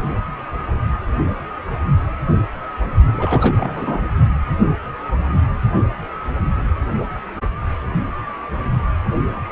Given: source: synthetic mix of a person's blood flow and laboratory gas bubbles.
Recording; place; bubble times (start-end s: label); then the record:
Doppler ultrasound of blood flow; precordium
3.17-4.03 s: bubbles
From the record:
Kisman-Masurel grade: 212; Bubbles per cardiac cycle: several, 3 to 8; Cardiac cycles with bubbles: 1 to 10%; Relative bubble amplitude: moderate (0.250 to 0.450); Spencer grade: 1 (occasional bubble signal discernible with the cardiac motion signal, with majority of cardiac periods free of bubbles); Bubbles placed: only in the low amplitude regions of the cardiac cycle